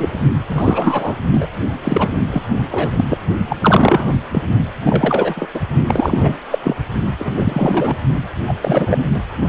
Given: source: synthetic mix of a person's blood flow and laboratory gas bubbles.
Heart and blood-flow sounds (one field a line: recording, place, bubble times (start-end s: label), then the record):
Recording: Doppler ultrasound of blood flow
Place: precordium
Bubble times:
0.00-0.20 s: bubbles
0.49-1.16 s: bubbles
1.31-1.47 s: bubbles
1.83-2.25 s: bubbles
2.31-2.42 s: bubbles
2.71-3.05 s: bubbles
3.09-3.18 s: bubbles
3.50-3.56 s: bubbles
3.61-4.16 s: bubbles
4.33-4.42 s: bubbles
4.85-5.49 s: bubbles
5.54-5.60 s: bubbles
5.88-6.37 s: bubbles
6.51-6.58 s: bubbles
6.62-6.76 s: bubbles
7.19-7.97 s: bubbles
8.47-8.55 s: bubbles
8.61-9.05 s: bubbles
9.14-9.20 s: bubbles
From the record:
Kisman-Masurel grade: 333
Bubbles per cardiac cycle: rolling drumbeat, 9 or more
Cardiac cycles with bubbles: 50 to 99%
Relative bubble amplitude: loud (0.450 to 0.775)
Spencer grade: 3 (all of the cardiac periods contain showers or single bubble signals, but not dominating or overriding the cardiac motion signals)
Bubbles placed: only in the low amplitude regions of the cardiac cycle